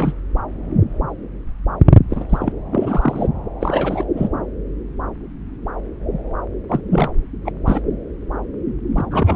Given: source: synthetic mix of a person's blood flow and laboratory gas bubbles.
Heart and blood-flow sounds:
Doppler ultrasound of blood flow; subclavian vein
0.00-0.13 s: bubbles
2.10-2.25 s: bubbles
2.29-2.52 s: bubbles
2.72-3.28 s: bubbles
3.61-4.04 s: bubbles
4.16-4.28 s: bubbles
6.69-6.80 s: bubbles
6.91-7.10 s: bubbles
7.45-7.52 s: bubbles
7.66-7.80 s: bubbles
8.96-9.04 s: bubbles
9.11-9.35 s: bubbles
From the record:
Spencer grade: 3 (all of the cardiac periods contain showers or single bubble signals, but not dominating or overriding the cardiac motion signals); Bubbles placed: anywhere in the cardiac cycle

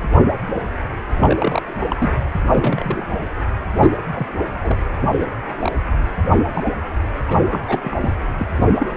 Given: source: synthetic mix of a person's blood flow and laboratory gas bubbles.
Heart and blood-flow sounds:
Doppler ultrasound of blood flow; precordium
1.17-1.77 s: bubbles
1.88-2.12 s: bubbles
2.46-3.05 s: bubbles
3.80-3.91 s: bubbles
4.14-4.27 s: bubbles
4.49-4.78 s: bubbles
5.01-5.10 s: bubbles
5.19-5.27 s: bubbles
5.62-5.72 s: bubbles
6.30-6.38 s: bubbles
6.54-6.72 s: bubbles
7.26-7.39 s: bubbles
7.43-7.62 s: bubbles
7.67-7.80 s: bubbles
7.83-7.96 s: bubbles
8.01-8.11 s: bubbles
8.38-8.46 s: bubbles
8.58-8.92 s: bubbles
From the record:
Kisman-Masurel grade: 232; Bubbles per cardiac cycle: several, 3 to 8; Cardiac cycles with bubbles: 50 to 99%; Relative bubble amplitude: moderate (0.250 to 0.450); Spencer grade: 3 (all of the cardiac periods contain showers or single bubble signals, but not dominating or overriding the cardiac motion signals); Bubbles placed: anywhere in the cardiac cycle

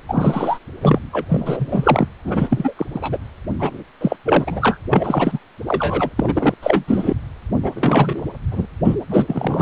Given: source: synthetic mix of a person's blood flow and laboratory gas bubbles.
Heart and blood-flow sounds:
Doppler ultrasound of blood flow; precordium
0.07-0.58 s: bubbles
0.81-0.99 s: bubbles
1.12-1.25 s: bubbles
1.29-2.08 s: bubbles
2.24-2.73 s: bubbles
2.76-2.86 s: bubbles
2.94-3.17 s: bubbles
3.59-3.84 s: bubbles
4.00-4.17 s: bubbles
4.25-4.78 s: bubbles
4.90-5.39 s: bubbles
5.66-6.10 s: bubbles
6.18-6.54 s: bubbles
6.62-6.84 s: bubbles
6.88-7.14 s: bubbles
7.62-7.72 s: bubbles
7.75-8.23 s: bubbles
8.51-8.66 s: bubbles
8.85-8.96 s: bubbles
9.09-9.62 s: bubbles
From the record:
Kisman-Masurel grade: 343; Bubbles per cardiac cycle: rolling drumbeat, 9 or more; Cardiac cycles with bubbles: 100%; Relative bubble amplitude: loud (0.450 to 0.775); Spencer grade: 3 (all of the cardiac periods contain showers or single bubble signals, but not dominating or overriding the cardiac motion signals); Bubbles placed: anywhere in the cardiac cycle

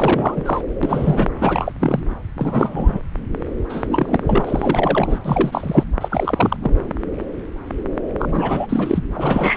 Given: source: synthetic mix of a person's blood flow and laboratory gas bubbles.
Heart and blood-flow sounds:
Doppler ultrasound of blood flow; subclavian vein
0.00-0.61 s: bubbles
0.83-1.27 s: bubbles
1.40-1.73 s: bubbles
1.80-2.03 s: bubbles
2.37-3.02 s: bubbles
3.69-4.19 s: bubbles
4.23-5.19 s: bubbles
5.24-5.85 s: bubbles
6.00-6.57 s: bubbles
6.62-6.75 s: bubbles
8.19-8.67 s: bubbles
8.69-9.04 s: bubbles
9.12-9.57 s: bubbles
From the record:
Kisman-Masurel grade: 332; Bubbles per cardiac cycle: rolling drumbeat, 9 or more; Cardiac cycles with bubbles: 50 to 99%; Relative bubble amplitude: moderate (0.250 to 0.450); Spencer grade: 3 (all of the cardiac periods contain showers or single bubble signals, but not dominating or overriding the cardiac motion signals); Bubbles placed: anywhere in the cardiac cycle

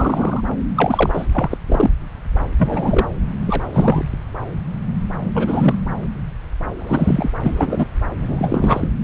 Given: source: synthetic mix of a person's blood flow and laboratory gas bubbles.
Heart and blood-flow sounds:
Doppler ultrasound of blood flow; subclavian vein
0.00-0.41 s: bubbles
0.76-1.26 s: bubbles
1.32-1.57 s: bubbles
1.66-1.90 s: bubbles
2.57-3.07 s: bubbles
3.46-3.64 s: bubbles
3.73-4.09 s: bubbles
5.34-5.75 s: bubbles
6.79-7.31 s: bubbles
7.42-7.86 s: bubbles
8.21-8.88 s: bubbles
From the record:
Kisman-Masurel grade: 233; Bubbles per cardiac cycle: several, 3 to 8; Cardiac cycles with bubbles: 50 to 99%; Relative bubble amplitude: loud (0.450 to 0.775); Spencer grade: 3 (all of the cardiac periods contain showers or single bubble signals, but not dominating or overriding the cardiac motion signals); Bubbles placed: anywhere in the cardiac cycle

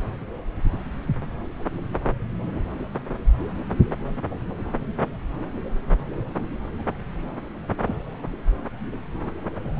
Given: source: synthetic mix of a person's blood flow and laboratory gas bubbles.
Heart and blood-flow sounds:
Doppler ultrasound of blood flow; subclavian vein
7.85-7.96 s: bubbles
From the record:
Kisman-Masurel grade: 111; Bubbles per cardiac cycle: 1 to 2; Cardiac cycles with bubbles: 1 to 10%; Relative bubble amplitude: barely perceptible (0.100 to 0.250); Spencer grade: 1 (occasional bubble signal discernible with the cardiac motion signal, with majority of cardiac periods free of bubbles); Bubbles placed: anywhere in the cardiac cycle

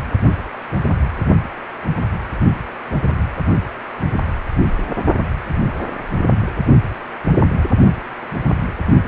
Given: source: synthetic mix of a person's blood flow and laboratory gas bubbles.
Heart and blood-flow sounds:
Doppler ultrasound of blood flow; precordium
no bubbles
From the record:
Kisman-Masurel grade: 000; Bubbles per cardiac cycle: 0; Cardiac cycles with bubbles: 0%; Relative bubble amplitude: no bubbles discernible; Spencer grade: 0 (complete lack of bubble signals)

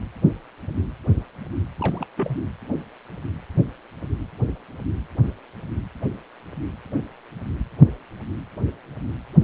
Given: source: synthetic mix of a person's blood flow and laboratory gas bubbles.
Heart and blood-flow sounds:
Doppler ultrasound of blood flow; precordium
1.79-2.06 s: bubbles
2.17-2.38 s: bubbles
From the record:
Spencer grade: 1 (occasional bubble signal discernible with the cardiac motion signal, with majority of cardiac periods free of bubbles); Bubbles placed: anywhere in the cardiac cycle

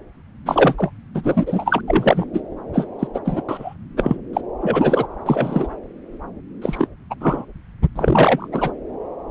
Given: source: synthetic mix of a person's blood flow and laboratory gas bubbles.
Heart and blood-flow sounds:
Doppler ultrasound of blood flow; subclavian vein
0.46-0.91 s: bubbles
1.15-1.81 s: bubbles
1.87-2.26 s: bubbles
2.33-2.41 s: bubbles
2.73-2.87 s: bubbles
2.99-3.07 s: bubbles
3.14-3.19 s: bubbles
3.25-3.42 s: bubbles
3.48-3.74 s: bubbles
3.97-4.17 s: bubbles
4.33-4.41 s: bubbles
4.60-5.07 s: bubbles
5.26-5.68 s: bubbles
6.62-6.88 s: bubbles
7.10-7.15 s: bubbles
7.21-7.45 s: bubbles
7.96-8.47 s: bubbles
8.52-8.71 s: bubbles
From the record:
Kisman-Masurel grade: 233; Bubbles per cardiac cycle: several, 3 to 8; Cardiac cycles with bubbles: 50 to 99%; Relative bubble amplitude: loud (0.450 to 0.775); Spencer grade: 3 (all of the cardiac periods contain showers or single bubble signals, but not dominating or overriding the cardiac motion signals); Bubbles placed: anywhere in the cardiac cycle

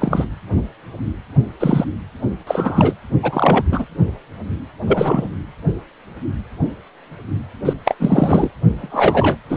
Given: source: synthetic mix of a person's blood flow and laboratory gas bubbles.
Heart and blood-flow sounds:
Doppler ultrasound of blood flow; precordium
0.00-0.25 s: bubbles
1.59-1.85 s: bubbles
2.47-2.95 s: bubbles
3.23-3.64 s: bubbles
3.72-3.85 s: bubbles
4.86-5.31 s: bubbles
7.65-7.74 s: bubbles
7.84-7.95 s: bubbles
7.99-8.49 s: bubbles
8.77-9.38 s: bubbles
9.49-9.57 s: bubbles
From the record:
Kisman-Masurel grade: 233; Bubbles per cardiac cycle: several, 3 to 8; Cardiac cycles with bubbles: 50 to 99%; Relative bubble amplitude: loud (0.450 to 0.775); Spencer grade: 3 (all of the cardiac periods contain showers or single bubble signals, but not dominating or overriding the cardiac motion signals); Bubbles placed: anywhere in the cardiac cycle

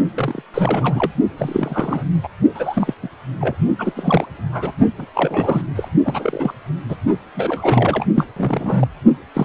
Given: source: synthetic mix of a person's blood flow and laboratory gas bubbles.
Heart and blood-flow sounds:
Doppler ultrasound of blood flow; precordium
0.15-0.42 s: bubbles
0.54-1.11 s: bubbles
1.38-2.04 s: bubbles
2.23-2.28 s: bubbles
2.54-2.94 s: bubbles
3.02-3.08 s: bubbles
3.40-3.55 s: bubbles
3.78-3.93 s: bubbles
3.95-4.26 s: bubbles
4.34-4.71 s: bubbles
4.98-5.06 s: bubbles
5.15-5.62 s: bubbles
5.75-5.89 s: bubbles
6.04-6.53 s: bubbles
6.89-6.96 s: bubbles
7.35-8.05 s: bubbles
8.14-8.25 s: bubbles
8.36-8.88 s: bubbles
9.34-9.45 s: bubbles
From the record:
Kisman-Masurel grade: 342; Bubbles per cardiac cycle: rolling drumbeat, 9 or more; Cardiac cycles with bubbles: 100%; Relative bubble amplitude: moderate (0.250 to 0.450); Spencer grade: 3 (all of the cardiac periods contain showers or single bubble signals, but not dominating or overriding the cardiac motion signals); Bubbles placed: only in the low amplitude regions of the cardiac cycle

